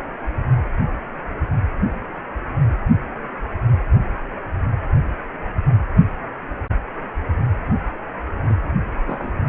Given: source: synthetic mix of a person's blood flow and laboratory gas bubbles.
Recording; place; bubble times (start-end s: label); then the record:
Doppler ultrasound of blood flow; precordium
8.49-8.54 s: bubbles
9.07-9.40 s: bubbles
From the record:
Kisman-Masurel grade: 111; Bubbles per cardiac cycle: 1 to 2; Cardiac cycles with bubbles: 1 to 10%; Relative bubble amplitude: barely perceptible (0.100 to 0.250); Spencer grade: 1 (occasional bubble signal discernible with the cardiac motion signal, with majority of cardiac periods free of bubbles); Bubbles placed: anywhere in the cardiac cycle